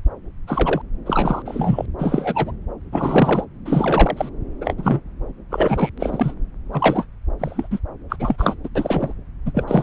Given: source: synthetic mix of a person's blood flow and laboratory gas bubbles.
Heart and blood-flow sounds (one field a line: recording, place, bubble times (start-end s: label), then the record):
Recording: Doppler ultrasound of blood flow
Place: subclavian vein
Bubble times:
0.47-0.81 s: bubbles
1.06-1.42 s: bubbles
1.45-1.86 s: bubbles
1.98-2.52 s: bubbles
2.92-3.45 s: bubbles
3.65-4.29 s: bubbles
4.61-4.75 s: bubbles
4.77-5.01 s: bubbles
5.50-5.89 s: bubbles
5.99-6.34 s: bubbles
6.72-7.06 s: bubbles
7.39-7.68 s: bubbles
7.71-7.79 s: bubbles
8.09-8.16 s: bubbles
8.19-8.55 s: bubbles
8.63-8.69 s: bubbles
8.75-9.14 s: bubbles
9.45-9.64 s: bubbles
9.67-9.83 s: bubbles
From the record:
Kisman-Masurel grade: 243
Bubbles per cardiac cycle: several, 3 to 8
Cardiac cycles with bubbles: 100%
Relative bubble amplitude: loud (0.450 to 0.775)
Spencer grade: 3 (all of the cardiac periods contain showers or single bubble signals, but not dominating or overriding the cardiac motion signals)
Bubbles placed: anywhere in the cardiac cycle